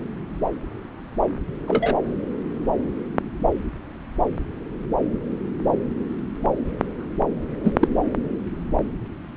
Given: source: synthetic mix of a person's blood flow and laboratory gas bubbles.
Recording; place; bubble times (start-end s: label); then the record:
Doppler ultrasound of blood flow; subclavian vein
1.67-1.95 s: bubbles
7.63-7.73 s: bubbles
7.81-7.88 s: bubbles
From the record:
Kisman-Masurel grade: 113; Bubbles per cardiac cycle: 1 to 2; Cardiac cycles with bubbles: 1 to 10%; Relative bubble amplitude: loud (0.450 to 0.775); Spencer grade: 1 (occasional bubble signal discernible with the cardiac motion signal, with majority of cardiac periods free of bubbles); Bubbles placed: anywhere in the cardiac cycle